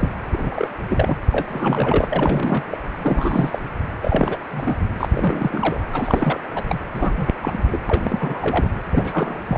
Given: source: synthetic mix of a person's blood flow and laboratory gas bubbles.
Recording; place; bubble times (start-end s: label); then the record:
Doppler ultrasound of blood flow; precordium
0.00-0.10 s: bubbles
0.31-0.68 s: bubbles
0.89-1.16 s: bubbles
1.32-2.07 s: bubbles
2.10-2.64 s: bubbles
2.71-2.78 s: bubbles
3.04-3.58 s: bubbles
4.00-4.37 s: bubbles
4.53-4.78 s: bubbles
5.00-5.08 s: bubbles
5.11-5.80 s: bubbles
5.92-6.40 s: bubbles
6.54-6.63 s: bubbles
6.69-6.78 s: bubbles
6.94-7.33 s: bubbles
7.37-7.63 s: bubbles
7.72-7.82 s: bubbles
7.90-8.68 s: bubbles
8.90-9.42 s: bubbles
9.48-9.58 s: bubbles
From the record:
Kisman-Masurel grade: 342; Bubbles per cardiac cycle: rolling drumbeat, 9 or more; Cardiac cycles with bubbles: 100%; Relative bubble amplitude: moderate (0.250 to 0.450); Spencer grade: 3 (all of the cardiac periods contain showers or single bubble signals, but not dominating or overriding the cardiac motion signals); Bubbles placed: anywhere in the cardiac cycle